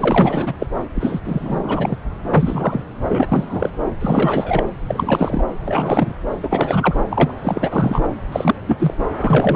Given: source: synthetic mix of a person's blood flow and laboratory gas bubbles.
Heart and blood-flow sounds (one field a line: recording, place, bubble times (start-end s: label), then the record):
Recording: Doppler ultrasound of blood flow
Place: subclavian vein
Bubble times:
0.00-0.53 s: bubbles
0.59-0.67 s: bubbles
0.96-1.20 s: bubbles
1.25-1.60 s: bubbles
1.63-1.96 s: bubbles
2.34-2.84 s: bubbles
3.09-3.71 s: bubbles
4.00-4.67 s: bubbles
4.87-5.43 s: bubbles
5.65-6.12 s: bubbles
6.42-6.94 s: bubbles
7.10-7.32 s: bubbles
7.42-8.10 s: bubbles
8.32-8.55 s: bubbles
8.67-8.94 s: bubbles
9.20-9.56 s: bubbles
From the record:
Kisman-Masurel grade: 342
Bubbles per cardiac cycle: rolling drumbeat, 9 or more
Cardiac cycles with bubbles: 100%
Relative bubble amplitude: moderate (0.250 to 0.450)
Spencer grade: 3 (all of the cardiac periods contain showers or single bubble signals, but not dominating or overriding the cardiac motion signals)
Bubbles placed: anywhere in the cardiac cycle